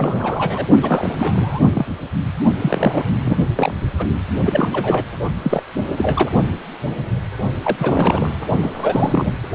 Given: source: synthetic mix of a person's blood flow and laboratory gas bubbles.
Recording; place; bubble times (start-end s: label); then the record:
Doppler ultrasound of blood flow; precordium
0.00-0.68 s: bubbles
0.82-1.60 s: bubbles
1.73-1.86 s: bubbles
2.58-3.04 s: bubbles
3.19-3.38 s: bubbles
3.55-3.75 s: bubbles
3.98-4.06 s: bubbles
4.41-4.68 s: bubbles
4.72-5.04 s: bubbles
5.43-5.62 s: bubbles
5.96-6.30 s: bubbles
7.62-8.28 s: bubbles
8.62-9.31 s: bubbles
From the record:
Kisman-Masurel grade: 333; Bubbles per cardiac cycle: rolling drumbeat, 9 or more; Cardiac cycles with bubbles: 50 to 99%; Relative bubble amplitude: loud (0.450 to 0.775); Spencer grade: 3 (all of the cardiac periods contain showers or single bubble signals, but not dominating or overriding the cardiac motion signals); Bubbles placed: only in the low amplitude regions of the cardiac cycle